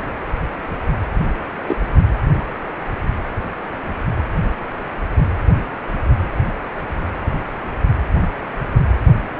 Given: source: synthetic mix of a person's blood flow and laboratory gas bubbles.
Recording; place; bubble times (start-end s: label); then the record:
Doppler ultrasound of blood flow; precordium
1.67-1.78 s: bubbles
From the record:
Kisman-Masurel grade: 112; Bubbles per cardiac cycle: 1 to 2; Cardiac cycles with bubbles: 1 to 10%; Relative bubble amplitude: moderate (0.250 to 0.450); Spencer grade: 1 (occasional bubble signal discernible with the cardiac motion signal, with majority of cardiac periods free of bubbles); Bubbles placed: anywhere in the cardiac cycle